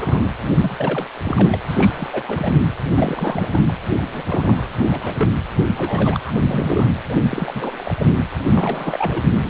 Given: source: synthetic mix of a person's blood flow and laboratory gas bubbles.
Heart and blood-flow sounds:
Doppler ultrasound of blood flow; precordium
0.00-0.27 s: bubbles
0.57-1.06 s: bubbles
1.24-1.58 s: bubbles
1.67-2.23 s: bubbles
2.27-2.61 s: bubbles
2.88-3.62 s: bubbles
3.68-3.72 s: bubbles
4.12-4.68 s: bubbles
4.74-5.29 s: bubbles
5.77-6.20 s: bubbles
6.26-6.32 s: bubbles
6.42-6.91 s: bubbles
7.09-7.17 s: bubbles
7.29-8.06 s: bubbles
8.45-9.23 s: bubbles
9.38-9.50 s: bubbles
From the record:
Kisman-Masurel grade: 342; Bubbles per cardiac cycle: rolling drumbeat, 9 or more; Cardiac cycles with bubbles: 100%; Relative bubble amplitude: moderate (0.250 to 0.450); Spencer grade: 3 (all of the cardiac periods contain showers or single bubble signals, but not dominating or overriding the cardiac motion signals); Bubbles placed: anywhere in the cardiac cycle

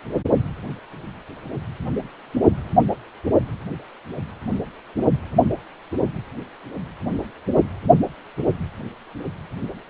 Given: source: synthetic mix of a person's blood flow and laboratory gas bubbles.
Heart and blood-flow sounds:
Doppler ultrasound of blood flow; precordium
no bubbles
From the record:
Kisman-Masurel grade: 000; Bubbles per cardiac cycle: 0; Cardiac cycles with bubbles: 0%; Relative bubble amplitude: no bubbles discernible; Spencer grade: 0 (complete lack of bubble signals)

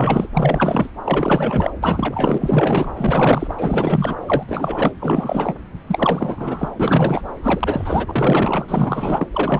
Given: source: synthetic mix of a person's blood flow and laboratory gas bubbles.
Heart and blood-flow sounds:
Doppler ultrasound of blood flow; subclavian vein
0.00-0.27 s: bubbles
0.33-0.90 s: bubbles
1.04-1.73 s: bubbles
1.82-2.92 s: bubbles
2.97-3.55 s: bubbles
3.57-4.15 s: bubbles
4.26-4.93 s: bubbles
5.00-5.56 s: bubbles
5.87-6.69 s: bubbles
6.79-7.24 s: bubbles
7.43-8.66 s: bubbles
8.68-9.27 s: bubbles
9.32-9.60 s: bubbles
From the record:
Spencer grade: 4 (maximum detectable bubble signal sounding continuously throughout systole and diastole of every cardiac period, and overriding the amplitude of the normal cardiac signals); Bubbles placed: anywhere in the cardiac cycle

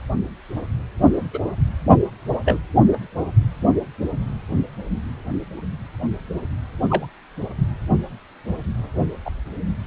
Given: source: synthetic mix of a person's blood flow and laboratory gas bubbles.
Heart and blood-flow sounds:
Doppler ultrasound of blood flow; precordium
1.33-1.40 s: bubbles
2.45-2.59 s: bubbles
2.92-2.96 s: bubbles
6.90-7.07 s: bubbles
9.25-9.30 s: bubbles
From the record:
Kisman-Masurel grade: 122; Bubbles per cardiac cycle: 1 to 2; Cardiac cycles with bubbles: 10 to 50%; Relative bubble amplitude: moderate (0.250 to 0.450); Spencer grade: 2 (many but less than half of the cardiac periods contain bubble signals, singularly or in groups); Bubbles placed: only in the low amplitude regions of the cardiac cycle

